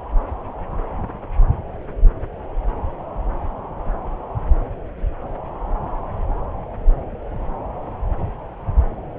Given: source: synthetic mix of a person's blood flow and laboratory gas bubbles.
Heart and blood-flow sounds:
Doppler ultrasound of blood flow; subclavian vein
no bubbles
From the record:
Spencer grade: 0 (complete lack of bubble signals)

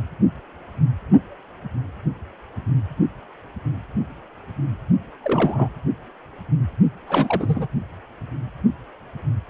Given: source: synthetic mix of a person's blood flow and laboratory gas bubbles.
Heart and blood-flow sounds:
Doppler ultrasound of blood flow; precordium
5.24-5.69 s: bubbles
7.08-7.67 s: bubbles
From the record:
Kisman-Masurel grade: 222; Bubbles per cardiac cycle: several, 3 to 8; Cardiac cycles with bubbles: 10 to 50%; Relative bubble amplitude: moderate (0.250 to 0.450); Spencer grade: 2 (many but less than half of the cardiac periods contain bubble signals, singularly or in groups); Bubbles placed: only in the low amplitude regions of the cardiac cycle

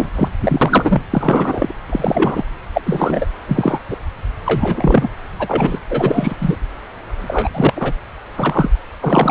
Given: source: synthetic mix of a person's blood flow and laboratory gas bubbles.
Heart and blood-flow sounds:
Doppler ultrasound of blood flow; subclavian vein
0.00-0.09 s: bubbles
0.15-0.29 s: bubbles
0.40-1.02 s: bubbles
1.10-1.75 s: bubbles
1.90-2.44 s: bubbles
2.73-2.81 s: bubbles
2.85-3.27 s: bubbles
3.48-3.79 s: bubbles
3.91-3.97 s: bubbles
4.46-5.08 s: bubbles
5.39-5.79 s: bubbles
5.89-6.36 s: bubbles
6.41-6.56 s: bubbles
7.17-7.49 s: bubbles
7.54-7.93 s: bubbles
8.37-8.71 s: bubbles
9.01-9.31 s: bubbles
From the record:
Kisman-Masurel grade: 243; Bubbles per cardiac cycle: several, 3 to 8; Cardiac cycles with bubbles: 100%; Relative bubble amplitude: loud (0.450 to 0.775); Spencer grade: 3 (all of the cardiac periods contain showers or single bubble signals, but not dominating or overriding the cardiac motion signals); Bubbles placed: anywhere in the cardiac cycle

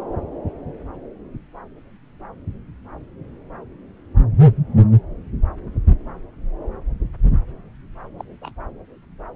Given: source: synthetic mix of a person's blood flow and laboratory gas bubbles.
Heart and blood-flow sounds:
Doppler ultrasound of blood flow; subclavian vein
8.19-8.24 s: bubbles
8.42-8.53 s: bubbles
From the record:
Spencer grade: 1 (occasional bubble signal discernible with the cardiac motion signal, with majority of cardiac periods free of bubbles); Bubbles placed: anywhere in the cardiac cycle

